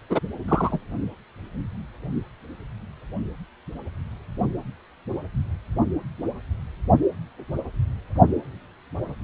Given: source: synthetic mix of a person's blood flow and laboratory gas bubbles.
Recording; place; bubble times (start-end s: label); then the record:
Doppler ultrasound of blood flow; precordium
0.09-0.19 s: bubbles
0.48-0.79 s: bubbles
From the record:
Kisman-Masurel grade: 212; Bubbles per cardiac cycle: several, 3 to 8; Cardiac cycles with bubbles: 1 to 10%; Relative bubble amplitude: moderate (0.250 to 0.450); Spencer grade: 1 (occasional bubble signal discernible with the cardiac motion signal, with majority of cardiac periods free of bubbles); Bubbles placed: only in the low amplitude regions of the cardiac cycle